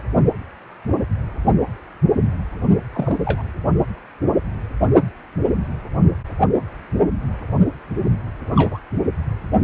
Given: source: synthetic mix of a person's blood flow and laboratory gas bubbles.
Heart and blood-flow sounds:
Doppler ultrasound of blood flow; precordium
2.93-3.17 s: bubbles
3.25-3.42 s: bubbles
8.55-8.78 s: bubbles
From the record:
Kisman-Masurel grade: 122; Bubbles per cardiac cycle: 1 to 2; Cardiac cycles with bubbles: 10 to 50%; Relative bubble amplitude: moderate (0.250 to 0.450); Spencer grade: 2 (many but less than half of the cardiac periods contain bubble signals, singularly or in groups); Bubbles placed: only in the low amplitude regions of the cardiac cycle

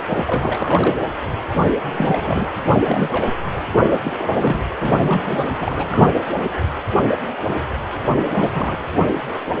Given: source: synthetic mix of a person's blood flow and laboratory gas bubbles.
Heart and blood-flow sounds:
Doppler ultrasound of blood flow; precordium
0.00-0.21 s: bubbles
0.27-1.02 s: bubbles
1.93-2.47 s: bubbles
2.68-3.31 s: bubbles
3.71-3.89 s: bubbles
3.92-4.00 s: bubbles
4.03-4.11 s: bubbles
4.17-4.59 s: bubbles
4.79-5.49 s: bubbles
5.58-6.08 s: bubbles
8.17-8.50 s: bubbles
8.53-8.85 s: bubbles
From the record:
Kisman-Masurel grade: 332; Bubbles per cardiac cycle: rolling drumbeat, 9 or more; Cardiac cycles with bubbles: 50 to 99%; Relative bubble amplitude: moderate (0.250 to 0.450); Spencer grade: 3 (all of the cardiac periods contain showers or single bubble signals, but not dominating or overriding the cardiac motion signals); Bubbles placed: anywhere in the cardiac cycle

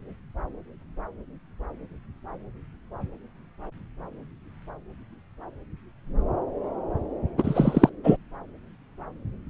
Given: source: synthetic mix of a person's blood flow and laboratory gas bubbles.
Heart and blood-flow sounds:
Doppler ultrasound of blood flow; subclavian vein
7.38-7.89 s: bubbles
8.04-8.17 s: bubbles
From the record:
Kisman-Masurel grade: 213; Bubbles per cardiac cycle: several, 3 to 8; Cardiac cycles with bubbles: 1 to 10%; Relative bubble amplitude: loud (0.450 to 0.775); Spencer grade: 1 (occasional bubble signal discernible with the cardiac motion signal, with majority of cardiac periods free of bubbles); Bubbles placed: anywhere in the cardiac cycle

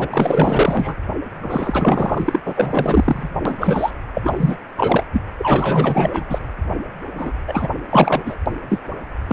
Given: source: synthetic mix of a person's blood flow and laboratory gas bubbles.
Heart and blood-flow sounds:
Doppler ultrasound of blood flow; precordium
0.00-0.08 s: bubbles
0.12-0.96 s: bubbles
1.42-2.40 s: bubbles
2.45-3.29 s: bubbles
3.45-3.91 s: bubbles
4.13-4.57 s: bubbles
4.77-5.07 s: bubbles
5.12-5.21 s: bubbles
5.38-6.38 s: bubbles
7.15-7.33 s: bubbles
7.48-7.67 s: bubbles
7.90-8.22 s: bubbles
8.25-8.35 s: bubbles
8.69-8.79 s: bubbles
9.28-9.33 s: bubbles
From the record:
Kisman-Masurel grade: 444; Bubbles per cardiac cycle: continuous sound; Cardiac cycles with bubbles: 100%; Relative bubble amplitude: maximal (0.775 to 0.999); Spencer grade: 4 (maximum detectable bubble signal sounding continuously throughout systole and diastole of every cardiac period, and overriding the amplitude of the normal cardiac signals); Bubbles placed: anywhere in the cardiac cycle

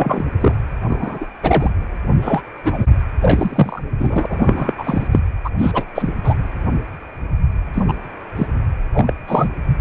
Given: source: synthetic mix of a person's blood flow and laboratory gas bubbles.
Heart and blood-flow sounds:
Doppler ultrasound of blood flow; precordium
0.00-0.23 s: bubbles
0.40-0.55 s: bubbles
0.88-1.27 s: bubbles
1.42-1.71 s: bubbles
2.21-2.42 s: bubbles
2.64-2.86 s: bubbles
3.22-3.82 s: bubbles
3.98-4.26 s: bubbles
4.29-4.74 s: bubbles
4.78-5.08 s: bubbles
5.11-5.20 s: bubbles
5.44-5.50 s: bubbles
5.58-5.84 s: bubbles
5.95-6.13 s: bubbles
6.24-6.34 s: bubbles
7.74-7.83 s: bubbles
7.88-7.94 s: bubbles
8.36-8.47 s: bubbles
8.93-9.13 s: bubbles
9.27-9.49 s: bubbles
From the record:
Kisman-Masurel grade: 233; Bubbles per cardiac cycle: several, 3 to 8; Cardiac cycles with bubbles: 50 to 99%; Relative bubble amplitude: loud (0.450 to 0.775); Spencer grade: 3 (all of the cardiac periods contain showers or single bubble signals, but not dominating or overriding the cardiac motion signals); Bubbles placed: anywhere in the cardiac cycle

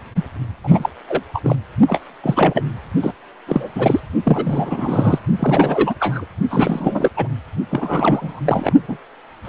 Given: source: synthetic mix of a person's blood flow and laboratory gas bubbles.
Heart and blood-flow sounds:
Doppler ultrasound of blood flow; precordium
0.00-0.12 s: bubbles
0.16-0.22 s: bubbles
0.64-0.90 s: bubbles
1.08-1.23 s: bubbles
1.33-1.56 s: bubbles
1.88-2.01 s: bubbles
2.23-2.63 s: bubbles
3.02-3.11 s: bubbles
3.47-3.69 s: bubbles
3.75-4.00 s: bubbles
4.25-5.19 s: bubbles
5.39-5.95 s: bubbles
6.00-6.26 s: bubbles
6.50-7.10 s: bubbles
7.17-7.28 s: bubbles
7.71-8.40 s: bubbles
8.45-8.74 s: bubbles
8.88-8.97 s: bubbles
9.45-9.49 s: bubbles
From the record:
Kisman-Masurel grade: 343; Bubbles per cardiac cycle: rolling drumbeat, 9 or more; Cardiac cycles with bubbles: 100%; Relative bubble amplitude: loud (0.450 to 0.775); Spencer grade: 3 (all of the cardiac periods contain showers or single bubble signals, but not dominating or overriding the cardiac motion signals); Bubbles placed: only in the low amplitude regions of the cardiac cycle

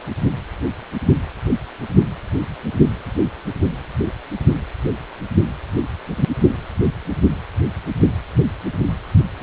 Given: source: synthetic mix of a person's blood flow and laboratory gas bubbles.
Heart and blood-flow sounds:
Doppler ultrasound of blood flow; precordium
no bubbles
From the record:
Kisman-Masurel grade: 000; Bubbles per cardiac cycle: 0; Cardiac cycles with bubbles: 0%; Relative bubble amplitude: no bubbles discernible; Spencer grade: 0 (complete lack of bubble signals)

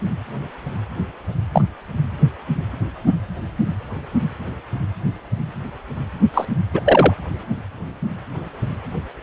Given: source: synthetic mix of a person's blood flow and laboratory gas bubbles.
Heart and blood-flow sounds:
Doppler ultrasound of blood flow; precordium
1.52-1.62 s: bubbles
6.33-6.45 s: bubbles
6.74-6.81 s: bubbles
6.84-7.14 s: bubbles
From the record:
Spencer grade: 2 (many but less than half of the cardiac periods contain bubble signals, singularly or in groups); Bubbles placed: anywhere in the cardiac cycle

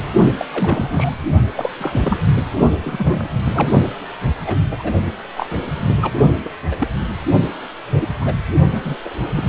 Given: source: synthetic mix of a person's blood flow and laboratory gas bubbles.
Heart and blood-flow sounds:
Doppler ultrasound of blood flow; precordium
0.38-0.45 s: bubbles
0.51-1.15 s: bubbles
1.56-1.71 s: bubbles
1.79-2.19 s: bubbles
2.85-3.29 s: bubbles
3.45-3.70 s: bubbles
4.45-4.58 s: bubbles
4.71-4.92 s: bubbles
5.36-5.47 s: bubbles
5.50-5.62 s: bubbles
5.77-6.12 s: bubbles
6.45-6.50 s: bubbles
6.71-6.88 s: bubbles
7.92-8.08 s: bubbles
8.21-8.35 s: bubbles
8.72-8.96 s: bubbles
9.04-9.09 s: bubbles
9.36-9.46 s: bubbles
From the record:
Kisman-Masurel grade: 242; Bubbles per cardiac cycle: several, 3 to 8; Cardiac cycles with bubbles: 100%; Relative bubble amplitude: moderate (0.250 to 0.450); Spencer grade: 3 (all of the cardiac periods contain showers or single bubble signals, but not dominating or overriding the cardiac motion signals); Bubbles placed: only in the low amplitude regions of the cardiac cycle

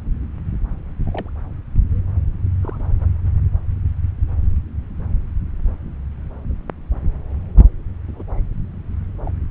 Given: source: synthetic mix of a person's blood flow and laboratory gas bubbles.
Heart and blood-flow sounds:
Doppler ultrasound of blood flow; subclavian vein
1.06-1.30 s: bubbles
2.63-3.08 s: bubbles
3.26-3.29 s: bubbles
8.07-8.23 s: bubbles
9.26-9.30 s: bubbles
From the record:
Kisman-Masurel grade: 121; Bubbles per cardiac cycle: 1 to 2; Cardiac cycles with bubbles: 10 to 50%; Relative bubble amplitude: barely perceptible (0.100 to 0.250); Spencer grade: 2 (many but less than half of the cardiac periods contain bubble signals, singularly or in groups); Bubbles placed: anywhere in the cardiac cycle

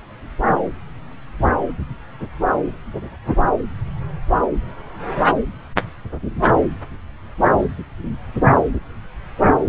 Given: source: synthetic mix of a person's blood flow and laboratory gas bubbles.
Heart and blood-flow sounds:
Doppler ultrasound of blood flow; subclavian vein
no bubbles
From the record:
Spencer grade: 0 (complete lack of bubble signals)

